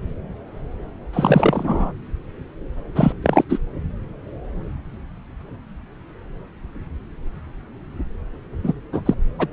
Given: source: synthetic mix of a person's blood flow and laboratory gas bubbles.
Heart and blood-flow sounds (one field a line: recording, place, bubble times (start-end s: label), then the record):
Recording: Doppler ultrasound of blood flow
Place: subclavian vein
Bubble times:
1.13-1.91 s: bubbles
2.95-3.12 s: bubbles
3.22-3.44 s: bubbles
3.49-3.58 s: bubbles
8.63-8.73 s: bubbles
8.93-9.02 s: bubbles
9.05-9.14 s: bubbles
9.38-9.46 s: bubbles
From the record:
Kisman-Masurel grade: 223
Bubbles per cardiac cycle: several, 3 to 8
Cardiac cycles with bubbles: 10 to 50%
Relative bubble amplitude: loud (0.450 to 0.775)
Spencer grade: 2 (many but less than half of the cardiac periods contain bubble signals, singularly or in groups)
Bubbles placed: anywhere in the cardiac cycle